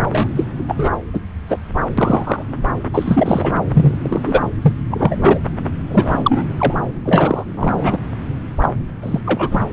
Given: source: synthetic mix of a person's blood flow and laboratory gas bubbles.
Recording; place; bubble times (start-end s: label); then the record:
Doppler ultrasound of blood flow; subclavian vein
0.00-0.49 s: bubbles
0.68-0.89 s: bubbles
1.13-1.20 s: bubbles
1.48-1.57 s: bubbles
1.97-2.42 s: bubbles
2.94-3.52 s: bubbles
3.74-3.98 s: bubbles
4.04-4.48 s: bubbles
4.62-4.73 s: bubbles
4.91-5.38 s: bubbles
5.90-6.44 s: bubbles
6.58-6.74 s: bubbles
7.05-7.44 s: bubbles
7.56-7.97 s: bubbles
8.62-8.70 s: bubbles
9.02-9.20 s: bubbles
9.25-9.48 s: bubbles
9.51-9.64 s: bubbles
From the record:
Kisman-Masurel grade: 243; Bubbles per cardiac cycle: several, 3 to 8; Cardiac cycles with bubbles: 100%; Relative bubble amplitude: loud (0.450 to 0.775); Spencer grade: 3 (all of the cardiac periods contain showers or single bubble signals, but not dominating or overriding the cardiac motion signals); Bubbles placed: anywhere in the cardiac cycle